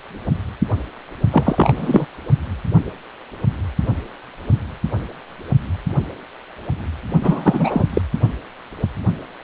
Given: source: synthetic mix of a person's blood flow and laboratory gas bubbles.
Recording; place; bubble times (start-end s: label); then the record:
Doppler ultrasound of blood flow; precordium
1.31-2.06 s: bubbles
7.21-7.86 s: bubbles
7.90-8.01 s: bubbles
From the record:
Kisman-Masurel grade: 223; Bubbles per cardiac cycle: several, 3 to 8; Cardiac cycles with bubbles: 10 to 50%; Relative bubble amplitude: loud (0.450 to 0.775); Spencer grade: 2 (many but less than half of the cardiac periods contain bubble signals, singularly or in groups); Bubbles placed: only in the low amplitude regions of the cardiac cycle